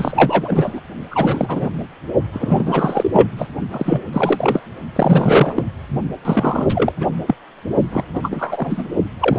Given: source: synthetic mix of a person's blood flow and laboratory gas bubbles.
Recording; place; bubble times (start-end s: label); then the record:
Doppler ultrasound of blood flow; precordium
0.00-0.80 s: bubbles
1.10-1.68 s: bubbles
2.33-3.27 s: bubbles
3.37-3.49 s: bubbles
3.71-4.02 s: bubbles
4.12-4.61 s: bubbles
4.95-5.64 s: bubbles
6.25-6.92 s: bubbles
7.00-7.08 s: bubbles
7.27-7.34 s: bubbles
7.92-8.04 s: bubbles
8.13-8.88 s: bubbles
9.20-9.39 s: bubbles
From the record:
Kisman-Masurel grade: 343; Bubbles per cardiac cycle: rolling drumbeat, 9 or more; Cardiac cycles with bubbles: 100%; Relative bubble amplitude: loud (0.450 to 0.775); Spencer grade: 3 (all of the cardiac periods contain showers or single bubble signals, but not dominating or overriding the cardiac motion signals); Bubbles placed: only in the low amplitude regions of the cardiac cycle